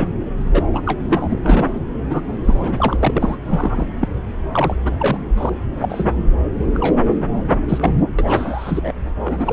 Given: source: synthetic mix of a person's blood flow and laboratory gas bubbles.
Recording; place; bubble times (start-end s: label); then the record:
Doppler ultrasound of blood flow; subclavian vein
0.00-0.08 s: bubbles
0.45-0.62 s: bubbles
0.73-0.82 s: bubbles
0.85-1.00 s: bubbles
1.08-1.40 s: bubbles
1.43-1.80 s: bubbles
2.10-2.21 s: bubbles
2.46-2.97 s: bubbles
3.00-3.37 s: bubbles
3.44-3.87 s: bubbles
4.00-4.08 s: bubbles
4.51-4.75 s: bubbles
4.84-5.18 s: bubbles
5.37-5.50 s: bubbles
5.79-6.12 s: bubbles
6.74-7.00 s: bubbles
7.68-7.94 s: bubbles
8.19-8.93 s: bubbles
9.24-9.53 s: bubbles
From the record:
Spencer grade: 3 (all of the cardiac periods contain showers or single bubble signals, but not dominating or overriding the cardiac motion signals); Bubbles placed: anywhere in the cardiac cycle